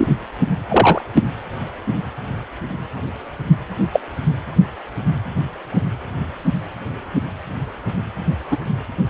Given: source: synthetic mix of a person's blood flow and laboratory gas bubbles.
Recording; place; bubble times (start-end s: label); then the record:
Doppler ultrasound of blood flow; precordium
0.00-0.17 s: bubbles
0.69-1.02 s: bubbles
3.93-4.00 s: bubbles
8.51-8.57 s: bubbles
From the record:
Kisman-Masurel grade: 123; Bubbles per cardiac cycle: 1 to 2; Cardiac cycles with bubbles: 10 to 50%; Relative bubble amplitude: loud (0.450 to 0.775); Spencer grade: 2 (many but less than half of the cardiac periods contain bubble signals, singularly or in groups); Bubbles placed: anywhere in the cardiac cycle